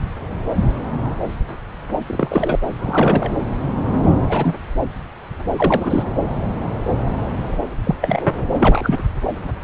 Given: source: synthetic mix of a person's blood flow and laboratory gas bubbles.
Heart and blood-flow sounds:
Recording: Doppler ultrasound of blood flow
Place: subclavian vein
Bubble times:
2.06-2.59 s: bubbles
2.79-3.40 s: bubbles
4.26-4.54 s: bubbles
5.53-6.04 s: bubbles
7.83-7.95 s: bubbles
8.02-8.47 s: bubbles
8.53-8.99 s: bubbles
From the record:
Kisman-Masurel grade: 223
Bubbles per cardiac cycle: several, 3 to 8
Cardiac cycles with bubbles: 10 to 50%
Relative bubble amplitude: loud (0.450 to 0.775)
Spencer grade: 2 (many but less than half of the cardiac periods contain bubble signals, singularly or in groups)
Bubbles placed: anywhere in the cardiac cycle

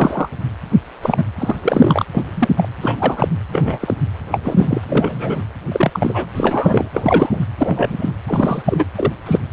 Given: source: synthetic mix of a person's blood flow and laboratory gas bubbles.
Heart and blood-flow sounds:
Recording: Doppler ultrasound of blood flow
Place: precordium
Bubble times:
0.00-0.29 s: bubbles
1.02-1.24 s: bubbles
1.39-2.05 s: bubbles
2.12-2.24 s: bubbles
2.36-2.48 s: bubbles
2.56-2.69 s: bubbles
2.81-3.28 s: bubbles
3.52-3.78 s: bubbles
3.81-3.94 s: bubbles
4.31-4.39 s: bubbles
4.43-4.81 s: bubbles
4.86-5.43 s: bubbles
5.72-6.25 s: bubbles
6.35-6.89 s: bubbles
6.94-7.41 s: bubbles
7.58-8.11 s: bubbles
8.27-8.62 s: bubbles
8.64-8.85 s: bubbles
8.96-9.13 s: bubbles
9.26-9.39 s: bubbles
From the record:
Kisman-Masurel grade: 243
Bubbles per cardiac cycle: several, 3 to 8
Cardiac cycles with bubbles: 100%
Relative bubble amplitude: loud (0.450 to 0.775)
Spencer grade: 3 (all of the cardiac periods contain showers or single bubble signals, but not dominating or overriding the cardiac motion signals)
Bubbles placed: anywhere in the cardiac cycle

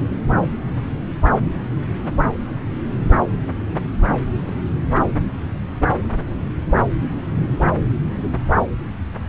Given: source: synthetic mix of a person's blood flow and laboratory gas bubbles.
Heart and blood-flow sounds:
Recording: Doppler ultrasound of blood flow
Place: subclavian vein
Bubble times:
4.13-4.22 s: bubbles
4.35-4.63 s: bubbles
From the record:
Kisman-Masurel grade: 211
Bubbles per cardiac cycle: several, 3 to 8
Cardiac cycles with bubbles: 1 to 10%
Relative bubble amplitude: barely perceptible (0.100 to 0.250)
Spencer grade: 1 (occasional bubble signal discernible with the cardiac motion signal, with majority of cardiac periods free of bubbles)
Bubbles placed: anywhere in the cardiac cycle

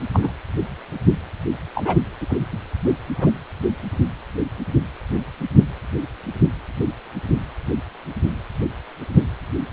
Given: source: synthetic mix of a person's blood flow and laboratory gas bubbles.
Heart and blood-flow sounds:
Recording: Doppler ultrasound of blood flow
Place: precordium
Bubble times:
0.14-0.33 s: bubbles
1.75-1.98 s: bubbles
2.21-2.26 s: bubbles
2.29-2.37 s: bubbles
3.18-3.30 s: bubbles
From the record:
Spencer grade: 2 (many but less than half of the cardiac periods contain bubble signals, singularly or in groups)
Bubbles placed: anywhere in the cardiac cycle

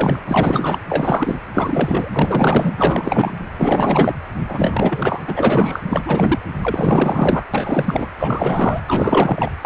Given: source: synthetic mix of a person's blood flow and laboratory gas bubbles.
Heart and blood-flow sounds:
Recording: Doppler ultrasound of blood flow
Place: precordium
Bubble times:
0.00-0.20 s: bubbles
0.27-0.80 s: bubbles
0.89-1.35 s: bubbles
1.54-2.10 s: bubbles
2.12-2.73 s: bubbles
2.77-3.34 s: bubbles
3.58-4.15 s: bubbles
4.48-5.22 s: bubbles
5.27-5.81 s: bubbles
5.86-6.38 s: bubbles
6.61-7.45 s: bubbles
7.54-8.07 s: bubbles
8.16-8.81 s: bubbles
8.86-9.51 s: bubbles
9.61-9.66 s: bubbles
From the record:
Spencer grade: 4 (maximum detectable bubble signal sounding continuously throughout systole and diastole of every cardiac period, and overriding the amplitude of the normal cardiac signals)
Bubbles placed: anywhere in the cardiac cycle

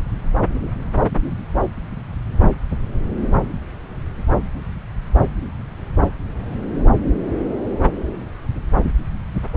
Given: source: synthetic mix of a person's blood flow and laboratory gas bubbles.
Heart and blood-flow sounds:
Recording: Doppler ultrasound of blood flow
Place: subclavian vein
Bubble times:
no bubbles
From the record:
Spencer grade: 0 (complete lack of bubble signals)

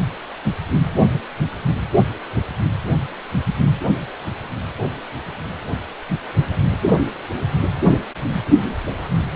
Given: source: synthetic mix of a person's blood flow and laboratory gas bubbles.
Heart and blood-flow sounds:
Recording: Doppler ultrasound of blood flow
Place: precordium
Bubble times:
no bubbles
From the record:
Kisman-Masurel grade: 000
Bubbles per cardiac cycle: 0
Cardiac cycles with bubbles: 0%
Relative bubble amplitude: no bubbles discernible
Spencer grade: 0 (complete lack of bubble signals)

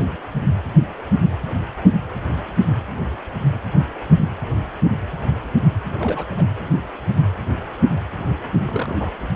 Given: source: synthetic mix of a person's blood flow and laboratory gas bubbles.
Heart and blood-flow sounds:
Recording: Doppler ultrasound of blood flow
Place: precordium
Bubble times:
5.99-6.25 s: bubbles
6.36-6.50 s: bubbles
8.65-9.11 s: bubbles
9.21-9.29 s: bubbles
From the record:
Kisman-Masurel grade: 211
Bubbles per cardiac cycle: several, 3 to 8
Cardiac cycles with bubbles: 1 to 10%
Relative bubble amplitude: barely perceptible (0.100 to 0.250)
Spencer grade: 1 (occasional bubble signal discernible with the cardiac motion signal, with majority of cardiac periods free of bubbles)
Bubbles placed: anywhere in the cardiac cycle

